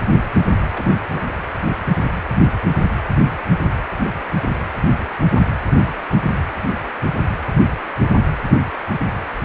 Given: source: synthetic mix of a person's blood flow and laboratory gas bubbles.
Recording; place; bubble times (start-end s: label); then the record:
Doppler ultrasound of blood flow; precordium
0.73-0.96 s: bubbles
1.11-1.31 s: bubbles
From the record:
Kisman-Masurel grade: 221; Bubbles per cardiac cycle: several, 3 to 8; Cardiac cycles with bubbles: 10 to 50%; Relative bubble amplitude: barely perceptible (0.100 to 0.250); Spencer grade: 2 (many but less than half of the cardiac periods contain bubble signals, singularly or in groups); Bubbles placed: anywhere in the cardiac cycle